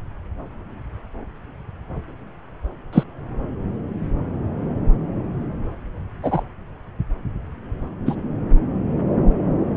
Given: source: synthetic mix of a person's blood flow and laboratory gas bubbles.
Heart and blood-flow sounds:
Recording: Doppler ultrasound of blood flow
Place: subclavian vein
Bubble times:
2.92-3.03 s: bubbles
3.19-3.21 s: bubbles
6.23-6.42 s: bubbles
8.06-8.15 s: bubbles
From the record:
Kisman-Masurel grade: 123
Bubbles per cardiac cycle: 1 to 2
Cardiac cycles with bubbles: 10 to 50%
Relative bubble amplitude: loud (0.450 to 0.775)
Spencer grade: 2 (many but less than half of the cardiac periods contain bubble signals, singularly or in groups)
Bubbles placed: anywhere in the cardiac cycle

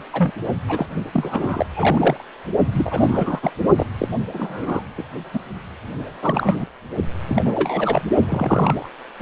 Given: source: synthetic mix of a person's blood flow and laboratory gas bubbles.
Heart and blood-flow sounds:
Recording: Doppler ultrasound of blood flow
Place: precordium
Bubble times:
0.12-0.33 s: bubbles
0.68-0.86 s: bubbles
1.14-1.66 s: bubbles
1.73-2.25 s: bubbles
2.73-3.51 s: bubbles
3.76-3.87 s: bubbles
3.98-4.08 s: bubbles
4.33-4.83 s: bubbles
4.97-5.04 s: bubbles
5.33-5.39 s: bubbles
6.21-6.66 s: bubbles
7.26-7.42 s: bubbles
7.45-8.02 s: bubbles
8.29-8.89 s: bubbles
9.19-9.22 s: bubbles
From the record:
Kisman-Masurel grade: 242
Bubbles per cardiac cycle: several, 3 to 8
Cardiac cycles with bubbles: 100%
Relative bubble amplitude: moderate (0.250 to 0.450)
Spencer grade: 3 (all of the cardiac periods contain showers or single bubble signals, but not dominating or overriding the cardiac motion signals)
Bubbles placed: only in the low amplitude regions of the cardiac cycle

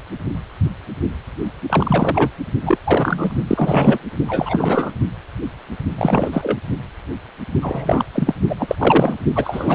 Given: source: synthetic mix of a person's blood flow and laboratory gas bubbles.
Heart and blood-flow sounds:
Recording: Doppler ultrasound of blood flow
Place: precordium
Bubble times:
1.69-2.30 s: bubbles
2.62-2.77 s: bubbles
2.84-3.37 s: bubbles
3.47-3.99 s: bubbles
4.26-4.94 s: bubbles
5.97-6.57 s: bubbles
7.62-8.04 s: bubbles
8.14-8.35 s: bubbles
8.48-8.55 s: bubbles
8.59-8.75 s: bubbles
8.78-9.18 s: bubbles
9.35-9.75 s: bubbles
From the record:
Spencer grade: 3 (all of the cardiac periods contain showers or single bubble signals, but not dominating or overriding the cardiac motion signals)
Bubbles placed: only in the low amplitude regions of the cardiac cycle

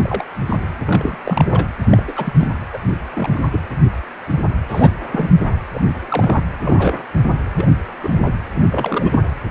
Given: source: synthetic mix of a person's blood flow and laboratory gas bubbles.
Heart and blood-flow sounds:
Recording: Doppler ultrasound of blood flow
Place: precordium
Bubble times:
0.00-0.24 s: bubbles
0.47-0.56 s: bubbles
0.85-1.18 s: bubbles
1.24-1.67 s: bubbles
1.85-2.03 s: bubbles
2.07-2.33 s: bubbles
2.39-2.51 s: bubbles
2.73-2.78 s: bubbles
3.12-3.40 s: bubbles
3.52-3.60 s: bubbles
4.69-4.92 s: bubbles
5.11-5.29 s: bubbles
5.40-5.48 s: bubbles
5.73-5.81 s: bubbles
6.08-6.43 s: bubbles
6.61-7.04 s: bubbles
7.58-7.67 s: bubbles
8.03-8.33 s: bubbles
8.53-9.22 s: bubbles
From the record:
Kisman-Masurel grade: 232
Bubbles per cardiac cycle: several, 3 to 8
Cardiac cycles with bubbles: 50 to 99%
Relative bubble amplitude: moderate (0.250 to 0.450)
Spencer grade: 3 (all of the cardiac periods contain showers or single bubble signals, but not dominating or overriding the cardiac motion signals)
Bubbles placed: anywhere in the cardiac cycle

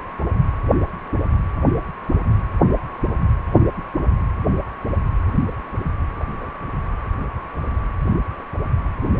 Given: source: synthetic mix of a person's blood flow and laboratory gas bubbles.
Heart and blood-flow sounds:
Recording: Doppler ultrasound of blood flow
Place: precordium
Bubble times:
6.17-6.24 s: bubbles
6.40-6.46 s: bubbles
From the record:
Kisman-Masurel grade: 111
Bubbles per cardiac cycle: 1 to 2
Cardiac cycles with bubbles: 1 to 10%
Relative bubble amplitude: barely perceptible (0.100 to 0.250)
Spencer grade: 1 (occasional bubble signal discernible with the cardiac motion signal, with majority of cardiac periods free of bubbles)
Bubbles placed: anywhere in the cardiac cycle

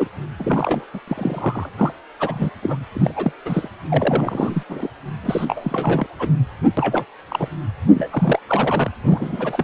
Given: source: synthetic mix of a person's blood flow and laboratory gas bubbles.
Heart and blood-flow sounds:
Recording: Doppler ultrasound of blood flow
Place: precordium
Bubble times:
0.00-0.08 s: bubbles
0.39-0.84 s: bubbles
0.94-1.00 s: bubbles
1.07-1.69 s: bubbles
1.77-1.92 s: bubbles
2.19-2.50 s: bubbles
2.62-2.77 s: bubbles
2.95-3.32 s: bubbles
3.45-3.69 s: bubbles
3.89-4.63 s: bubbles
4.69-4.88 s: bubbles
5.22-6.06 s: bubbles
6.19-6.29 s: bubbles
6.77-7.05 s: bubbles
7.28-7.48 s: bubbles
7.95-8.39 s: bubbles
8.48-8.90 s: bubbles
8.99-9.64 s: bubbles
From the record:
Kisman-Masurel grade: 342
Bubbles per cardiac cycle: rolling drumbeat, 9 or more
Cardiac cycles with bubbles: 100%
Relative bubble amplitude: moderate (0.250 to 0.450)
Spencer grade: 3 (all of the cardiac periods contain showers or single bubble signals, but not dominating or overriding the cardiac motion signals)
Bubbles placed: anywhere in the cardiac cycle

